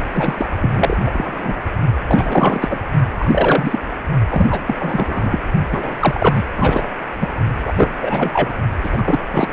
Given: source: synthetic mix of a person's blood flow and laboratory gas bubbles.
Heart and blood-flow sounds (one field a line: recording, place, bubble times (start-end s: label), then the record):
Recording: Doppler ultrasound of blood flow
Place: precordium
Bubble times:
0.12-0.49 s: bubbles
0.54-1.02 s: bubbles
1.06-1.63 s: bubbles
2.08-2.79 s: bubbles
3.18-3.79 s: bubbles
4.29-4.61 s: bubbles
4.66-4.75 s: bubbles
4.78-5.38 s: bubbles
5.71-5.96 s: bubbles
6.00-6.43 s: bubbles
6.56-6.88 s: bubbles
7.20-7.28 s: bubbles
7.64-7.73 s: bubbles
7.77-7.91 s: bubbles
8.01-8.56 s: bubbles
8.83-9.03 s: bubbles
9.06-9.19 s: bubbles
9.32-9.51 s: bubbles
From the record:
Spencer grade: 3 (all of the cardiac periods contain showers or single bubble signals, but not dominating or overriding the cardiac motion signals)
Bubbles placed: only in the low amplitude regions of the cardiac cycle